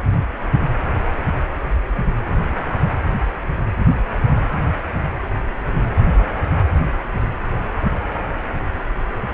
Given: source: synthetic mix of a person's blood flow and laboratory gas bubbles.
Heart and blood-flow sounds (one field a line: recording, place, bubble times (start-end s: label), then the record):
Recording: Doppler ultrasound of blood flow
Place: precordium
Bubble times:
no bubbles
From the record:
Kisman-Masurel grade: 000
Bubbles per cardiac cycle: 0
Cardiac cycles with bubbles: 0%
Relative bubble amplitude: no bubbles discernible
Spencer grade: 0 (complete lack of bubble signals)